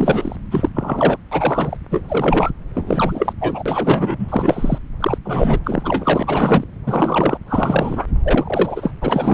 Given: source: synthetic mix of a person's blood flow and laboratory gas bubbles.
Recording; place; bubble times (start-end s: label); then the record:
Doppler ultrasound of blood flow; subclavian vein
0.00-0.36 s: bubbles
0.51-0.69 s: bubbles
0.74-1.18 s: bubbles
1.31-1.77 s: bubbles
1.91-2.50 s: bubbles
2.75-3.33 s: bubbles
3.40-4.79 s: bubbles
5.00-5.18 s: bubbles
5.24-5.60 s: bubbles
5.64-6.64 s: bubbles
6.87-7.38 s: bubbles
7.47-8.06 s: bubbles
8.24-8.91 s: bubbles
9.02-9.34 s: bubbles
From the record:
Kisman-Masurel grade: 342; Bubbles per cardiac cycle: rolling drumbeat, 9 or more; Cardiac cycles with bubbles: 100%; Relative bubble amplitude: moderate (0.250 to 0.450); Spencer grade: 3 (all of the cardiac periods contain showers or single bubble signals, but not dominating or overriding the cardiac motion signals); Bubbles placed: anywhere in the cardiac cycle